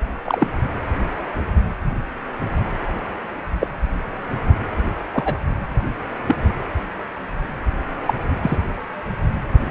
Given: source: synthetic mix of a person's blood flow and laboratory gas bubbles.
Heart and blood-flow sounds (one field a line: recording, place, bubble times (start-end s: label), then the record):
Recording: Doppler ultrasound of blood flow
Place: precordium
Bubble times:
0.25-0.47 s: bubbles
3.60-3.68 s: bubbles
5.12-5.38 s: bubbles
6.28-6.36 s: bubbles
8.05-8.14 s: bubbles
8.42-8.57 s: bubbles
From the record:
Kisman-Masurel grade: 122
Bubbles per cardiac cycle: 1 to 2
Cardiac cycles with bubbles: 10 to 50%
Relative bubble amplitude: moderate (0.250 to 0.450)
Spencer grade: 2 (many but less than half of the cardiac periods contain bubble signals, singularly or in groups)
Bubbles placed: anywhere in the cardiac cycle